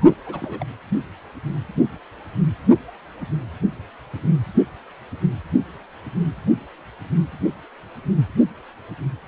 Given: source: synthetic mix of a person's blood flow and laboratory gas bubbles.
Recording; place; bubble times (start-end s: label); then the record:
Doppler ultrasound of blood flow; precordium
0.01-0.05 s: bubbles
0.09-0.16 s: bubbles
0.26-0.66 s: bubbles
From the record:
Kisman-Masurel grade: 211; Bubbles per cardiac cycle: several, 3 to 8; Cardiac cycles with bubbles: 1 to 10%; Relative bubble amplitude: barely perceptible (0.100 to 0.250); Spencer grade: 1 (occasional bubble signal discernible with the cardiac motion signal, with majority of cardiac periods free of bubbles); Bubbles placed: anywhere in the cardiac cycle